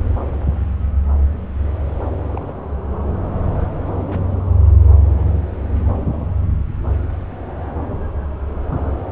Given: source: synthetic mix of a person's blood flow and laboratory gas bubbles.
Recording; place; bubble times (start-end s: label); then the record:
Doppler ultrasound of blood flow; subclavian vein
2.30-2.53 s: bubbles
4.10-4.19 s: bubbles
From the record:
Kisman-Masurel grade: 121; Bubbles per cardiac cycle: 1 to 2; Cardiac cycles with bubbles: 10 to 50%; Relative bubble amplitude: barely perceptible (0.100 to 0.250); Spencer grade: 2 (many but less than half of the cardiac periods contain bubble signals, singularly or in groups); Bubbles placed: anywhere in the cardiac cycle